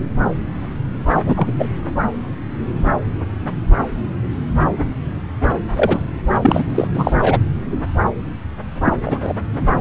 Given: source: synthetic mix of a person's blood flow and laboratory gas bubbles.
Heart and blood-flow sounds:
Doppler ultrasound of blood flow; subclavian vein
1.26-1.52 s: bubbles
1.58-1.69 s: bubbles
5.75-6.03 s: bubbles
6.42-6.63 s: bubbles
6.70-6.88 s: bubbles
6.93-7.12 s: bubbles
7.21-7.39 s: bubbles
8.85-8.97 s: bubbles
9.04-9.33 s: bubbles
From the record:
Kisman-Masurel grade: 223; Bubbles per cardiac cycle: several, 3 to 8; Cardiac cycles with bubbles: 10 to 50%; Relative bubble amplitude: loud (0.450 to 0.775); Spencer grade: 2 (many but less than half of the cardiac periods contain bubble signals, singularly or in groups); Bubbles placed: anywhere in the cardiac cycle

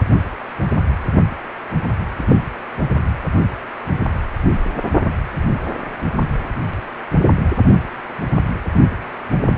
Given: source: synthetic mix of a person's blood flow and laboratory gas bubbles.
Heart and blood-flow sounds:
Doppler ultrasound of blood flow; precordium
2.17-2.42 s: bubbles
From the record:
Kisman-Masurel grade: 212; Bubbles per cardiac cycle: several, 3 to 8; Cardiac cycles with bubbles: 1 to 10%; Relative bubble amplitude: moderate (0.250 to 0.450); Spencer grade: 1 (occasional bubble signal discernible with the cardiac motion signal, with majority of cardiac periods free of bubbles); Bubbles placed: anywhere in the cardiac cycle

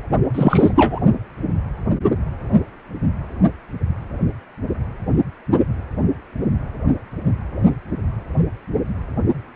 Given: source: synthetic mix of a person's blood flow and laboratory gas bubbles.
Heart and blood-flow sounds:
Doppler ultrasound of blood flow; precordium
0.33-0.99 s: bubbles
From the record:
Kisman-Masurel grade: 213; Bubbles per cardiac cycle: several, 3 to 8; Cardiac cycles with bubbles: 1 to 10%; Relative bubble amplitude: loud (0.450 to 0.775); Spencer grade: 1 (occasional bubble signal discernible with the cardiac motion signal, with majority of cardiac periods free of bubbles); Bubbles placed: only in the low amplitude regions of the cardiac cycle

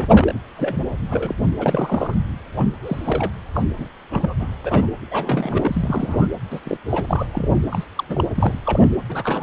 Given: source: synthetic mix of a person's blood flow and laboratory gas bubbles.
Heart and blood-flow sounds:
Doppler ultrasound of blood flow; precordium
0.00-0.32 s: bubbles
0.56-0.84 s: bubbles
1.09-1.35 s: bubbles
1.59-2.14 s: bubbles
2.56-2.67 s: bubbles
2.82-3.32 s: bubbles
3.54-3.65 s: bubbles
3.78-3.88 s: bubbles
4.10-4.34 s: bubbles
4.39-4.49 s: bubbles
4.64-4.88 s: bubbles
5.11-6.27 s: bubbles
6.50-6.59 s: bubbles
6.64-6.77 s: bubbles
6.89-7.26 s: bubbles
7.32-7.58 s: bubbles
7.71-7.84 s: bubbles
7.97-8.04 s: bubbles
8.09-8.24 s: bubbles
8.35-8.60 s: bubbles
8.65-8.88 s: bubbles
9.08-9.42 s: bubbles
From the record:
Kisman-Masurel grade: 242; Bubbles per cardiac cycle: several, 3 to 8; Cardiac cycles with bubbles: 100%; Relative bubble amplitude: moderate (0.250 to 0.450); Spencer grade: 3 (all of the cardiac periods contain showers or single bubble signals, but not dominating or overriding the cardiac motion signals); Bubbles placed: anywhere in the cardiac cycle

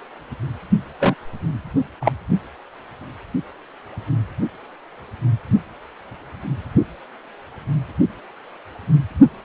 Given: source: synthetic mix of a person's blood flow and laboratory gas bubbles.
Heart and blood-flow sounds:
Doppler ultrasound of blood flow; precordium
1.00-1.15 s: bubbles
2.00-2.12 s: bubbles
From the record:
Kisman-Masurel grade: 123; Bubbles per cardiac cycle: 1 to 2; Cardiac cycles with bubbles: 10 to 50%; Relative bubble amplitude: loud (0.450 to 0.775); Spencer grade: 2 (many but less than half of the cardiac periods contain bubble signals, singularly or in groups); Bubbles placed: anywhere in the cardiac cycle

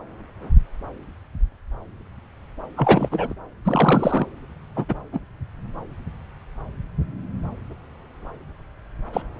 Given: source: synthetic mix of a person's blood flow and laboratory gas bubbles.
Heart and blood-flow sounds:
Doppler ultrasound of blood flow; subclavian vein
2.76-3.34 s: bubbles
3.65-4.27 s: bubbles
4.75-4.85 s: bubbles
4.88-4.95 s: bubbles
5.12-5.21 s: bubbles
9.12-9.22 s: bubbles
From the record:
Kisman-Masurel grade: 233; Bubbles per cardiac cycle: several, 3 to 8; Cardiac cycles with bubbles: 50 to 99%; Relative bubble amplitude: loud (0.450 to 0.775); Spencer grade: 3 (all of the cardiac periods contain showers or single bubble signals, but not dominating or overriding the cardiac motion signals); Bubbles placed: anywhere in the cardiac cycle

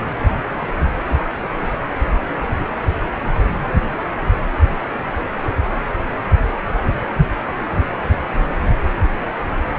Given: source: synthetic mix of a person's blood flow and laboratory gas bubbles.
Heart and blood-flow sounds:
Doppler ultrasound of blood flow; precordium
no bubbles
From the record:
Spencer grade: 0 (complete lack of bubble signals)

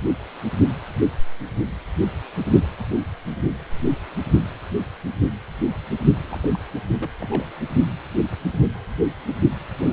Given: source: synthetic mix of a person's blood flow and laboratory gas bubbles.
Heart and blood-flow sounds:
Doppler ultrasound of blood flow; precordium
6.29-6.49 s: bubbles
6.53-6.58 s: bubbles
7.00-7.10 s: bubbles
7.20-7.46 s: bubbles
From the record:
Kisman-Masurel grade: 221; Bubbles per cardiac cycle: several, 3 to 8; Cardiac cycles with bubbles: 10 to 50%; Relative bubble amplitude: barely perceptible (0.100 to 0.250); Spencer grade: 2 (many but less than half of the cardiac periods contain bubble signals, singularly or in groups); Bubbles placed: only in the low amplitude regions of the cardiac cycle

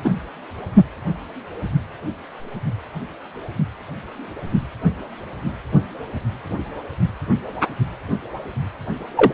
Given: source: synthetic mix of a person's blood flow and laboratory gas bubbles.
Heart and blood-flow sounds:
Doppler ultrasound of blood flow; precordium
0.04-0.14 s: bubbles
9.16-9.32 s: bubbles
From the record:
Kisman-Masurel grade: 123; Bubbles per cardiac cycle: 1 to 2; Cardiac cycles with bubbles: 10 to 50%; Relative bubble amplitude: loud (0.450 to 0.775); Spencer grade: 2 (many but less than half of the cardiac periods contain bubble signals, singularly or in groups); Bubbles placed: only in the low amplitude regions of the cardiac cycle

